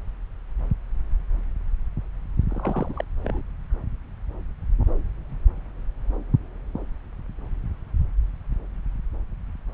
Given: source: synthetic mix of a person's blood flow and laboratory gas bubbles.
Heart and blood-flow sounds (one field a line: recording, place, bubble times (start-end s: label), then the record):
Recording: Doppler ultrasound of blood flow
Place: subclavian vein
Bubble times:
2.49-3.04 s: bubbles
3.24-3.42 s: bubbles
From the record:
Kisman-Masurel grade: 211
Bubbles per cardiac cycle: several, 3 to 8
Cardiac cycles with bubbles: 1 to 10%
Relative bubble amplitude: barely perceptible (0.100 to 0.250)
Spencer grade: 1 (occasional bubble signal discernible with the cardiac motion signal, with majority of cardiac periods free of bubbles)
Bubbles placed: anywhere in the cardiac cycle